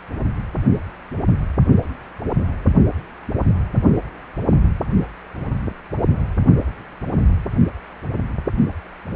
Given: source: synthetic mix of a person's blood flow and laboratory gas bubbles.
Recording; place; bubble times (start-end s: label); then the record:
Doppler ultrasound of blood flow; precordium
no bubbles
From the record:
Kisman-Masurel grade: 000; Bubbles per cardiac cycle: 0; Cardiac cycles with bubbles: 0%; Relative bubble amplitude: no bubbles discernible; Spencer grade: 0 (complete lack of bubble signals)